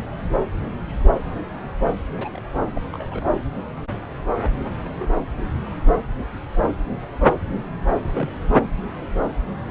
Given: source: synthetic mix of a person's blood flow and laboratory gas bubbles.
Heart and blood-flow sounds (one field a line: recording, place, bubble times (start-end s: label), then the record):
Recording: Doppler ultrasound of blood flow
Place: subclavian vein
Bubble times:
2.18-2.29 s: bubbles
2.32-2.40 s: bubbles
2.76-2.81 s: bubbles
2.93-3.29 s: bubbles
4.85-4.88 s: bubbles
4.99-5.06 s: bubbles
8.13-8.29 s: bubbles
From the record:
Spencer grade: 2 (many but less than half of the cardiac periods contain bubble signals, singularly or in groups)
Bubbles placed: anywhere in the cardiac cycle